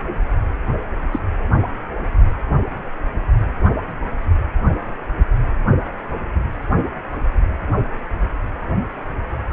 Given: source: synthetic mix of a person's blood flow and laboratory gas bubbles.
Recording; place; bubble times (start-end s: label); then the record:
Doppler ultrasound of blood flow; precordium
1.12-1.19 s: bubbles
From the record:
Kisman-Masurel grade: 112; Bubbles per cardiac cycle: 1 to 2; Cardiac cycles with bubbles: 1 to 10%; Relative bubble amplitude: moderate (0.250 to 0.450); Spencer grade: 1 (occasional bubble signal discernible with the cardiac motion signal, with majority of cardiac periods free of bubbles); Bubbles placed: anywhere in the cardiac cycle